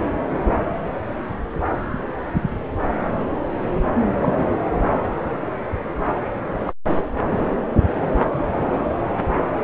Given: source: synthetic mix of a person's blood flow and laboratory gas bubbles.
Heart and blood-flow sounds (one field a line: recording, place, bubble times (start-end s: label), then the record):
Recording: Doppler ultrasound of blood flow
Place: subclavian vein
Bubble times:
4.21-4.47 s: bubbles
6.66-6.73 s: bubbles
8.32-8.53 s: bubbles
From the record:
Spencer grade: 2 (many but less than half of the cardiac periods contain bubble signals, singularly or in groups)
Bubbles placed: anywhere in the cardiac cycle